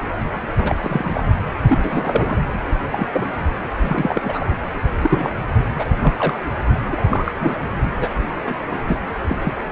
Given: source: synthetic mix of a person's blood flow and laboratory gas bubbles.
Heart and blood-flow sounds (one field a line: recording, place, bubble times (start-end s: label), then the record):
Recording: Doppler ultrasound of blood flow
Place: precordium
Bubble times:
0.00-0.08 s: bubbles
0.57-0.76 s: bubbles
0.80-1.23 s: bubbles
1.67-1.79 s: bubbles
1.83-2.38 s: bubbles
2.90-3.06 s: bubbles
3.13-3.28 s: bubbles
3.80-4.44 s: bubbles
5.02-5.30 s: bubbles
5.79-5.86 s: bubbles
6.02-6.14 s: bubbles
6.17-6.40 s: bubbles
6.91-7.02 s: bubbles
7.09-7.33 s: bubbles
7.40-7.57 s: bubbles
8.00-8.10 s: bubbles
8.45-8.78 s: bubbles
8.85-8.96 s: bubbles
9.29-9.38 s: bubbles
9.43-9.54 s: bubbles
From the record:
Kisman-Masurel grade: 242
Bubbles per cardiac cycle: several, 3 to 8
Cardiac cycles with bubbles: 100%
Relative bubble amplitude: moderate (0.250 to 0.450)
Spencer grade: 3 (all of the cardiac periods contain showers or single bubble signals, but not dominating or overriding the cardiac motion signals)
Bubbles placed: anywhere in the cardiac cycle